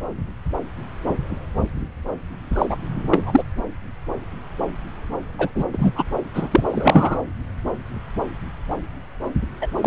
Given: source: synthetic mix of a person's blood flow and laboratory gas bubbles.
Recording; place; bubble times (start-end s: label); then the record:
Doppler ultrasound of blood flow; subclavian vein
2.52-2.66 s: bubbles
2.69-2.77 s: bubbles
3.11-3.43 s: bubbles
5.38-5.50 s: bubbles
5.55-5.65 s: bubbles
5.73-5.92 s: bubbles
5.95-6.04 s: bubbles
6.34-6.49 s: bubbles
6.51-6.61 s: bubbles
6.70-7.19 s: bubbles
9.62-9.67 s: bubbles
9.81-9.87 s: bubbles
From the record:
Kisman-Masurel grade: 223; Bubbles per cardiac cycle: several, 3 to 8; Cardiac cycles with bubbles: 10 to 50%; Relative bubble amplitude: loud (0.450 to 0.775); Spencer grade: 2 (many but less than half of the cardiac periods contain bubble signals, singularly or in groups); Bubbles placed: anywhere in the cardiac cycle